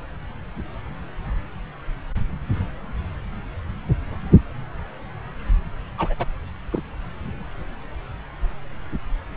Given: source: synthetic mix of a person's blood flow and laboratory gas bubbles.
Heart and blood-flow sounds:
Doppler ultrasound of blood flow; subclavian vein
5.97-6.15 s: bubbles
6.18-6.25 s: bubbles
6.71-6.81 s: bubbles
From the record:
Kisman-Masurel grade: 212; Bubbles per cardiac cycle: several, 3 to 8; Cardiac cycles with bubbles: 1 to 10%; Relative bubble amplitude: moderate (0.250 to 0.450); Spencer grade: 1 (occasional bubble signal discernible with the cardiac motion signal, with majority of cardiac periods free of bubbles); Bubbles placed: anywhere in the cardiac cycle

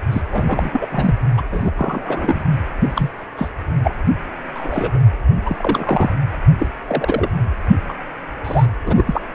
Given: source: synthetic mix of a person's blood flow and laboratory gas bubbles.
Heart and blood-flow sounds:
Doppler ultrasound of blood flow; precordium
0.10-0.23 s: bubbles
0.30-0.88 s: bubbles
0.91-1.14 s: bubbles
1.37-1.45 s: bubbles
1.50-1.71 s: bubbles
1.77-2.43 s: bubbles
2.80-3.10 s: bubbles
3.37-3.51 s: bubbles
3.83-3.95 s: bubbles
4.54-5.00 s: bubbles
5.45-6.12 s: bubbles
6.59-6.67 s: bubbles
6.87-7.29 s: bubbles
7.88-7.94 s: bubbles
8.45-8.66 s: bubbles
8.86-9.22 s: bubbles
From the record:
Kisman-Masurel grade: 242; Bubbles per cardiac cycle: several, 3 to 8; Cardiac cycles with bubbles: 100%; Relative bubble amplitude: moderate (0.250 to 0.450); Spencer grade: 3 (all of the cardiac periods contain showers or single bubble signals, but not dominating or overriding the cardiac motion signals); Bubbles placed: anywhere in the cardiac cycle

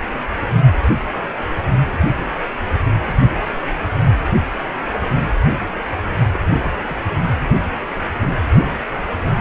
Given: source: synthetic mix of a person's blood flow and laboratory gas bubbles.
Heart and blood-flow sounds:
Doppler ultrasound of blood flow; precordium
6.33-6.39 s: bubbles
6.52-7.00 s: bubbles
From the record:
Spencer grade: 1 (occasional bubble signal discernible with the cardiac motion signal, with majority of cardiac periods free of bubbles); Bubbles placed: anywhere in the cardiac cycle

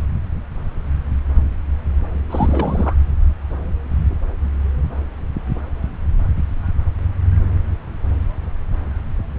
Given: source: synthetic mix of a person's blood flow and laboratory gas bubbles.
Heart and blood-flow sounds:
Doppler ultrasound of blood flow; subclavian vein
2.30-2.97 s: bubbles
From the record:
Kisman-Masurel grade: 222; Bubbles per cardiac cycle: several, 3 to 8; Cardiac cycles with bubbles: 10 to 50%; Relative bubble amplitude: moderate (0.250 to 0.450); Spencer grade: 2 (many but less than half of the cardiac periods contain bubble signals, singularly or in groups); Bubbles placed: anywhere in the cardiac cycle

